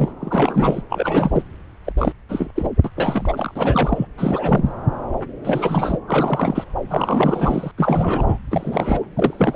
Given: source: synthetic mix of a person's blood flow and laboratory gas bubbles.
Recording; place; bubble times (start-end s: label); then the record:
Doppler ultrasound of blood flow; subclavian vein
0.00-0.12 s: bubbles
0.19-0.82 s: bubbles
0.90-1.45 s: bubbles
1.84-1.93 s: bubbles
1.97-2.12 s: bubbles
2.29-2.50 s: bubbles
2.55-2.69 s: bubbles
2.84-2.90 s: bubbles
2.96-4.08 s: bubbles
4.17-4.73 s: bubbles
5.44-5.99 s: bubbles
6.08-6.65 s: bubbles
6.89-7.71 s: bubbles
7.77-8.38 s: bubbles
8.51-9.12 s: bubbles
9.16-9.56 s: bubbles
From the record:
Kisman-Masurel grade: 332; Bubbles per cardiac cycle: rolling drumbeat, 9 or more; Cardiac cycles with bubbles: 50 to 99%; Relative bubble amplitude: moderate (0.250 to 0.450); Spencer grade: 3 (all of the cardiac periods contain showers or single bubble signals, but not dominating or overriding the cardiac motion signals); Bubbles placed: anywhere in the cardiac cycle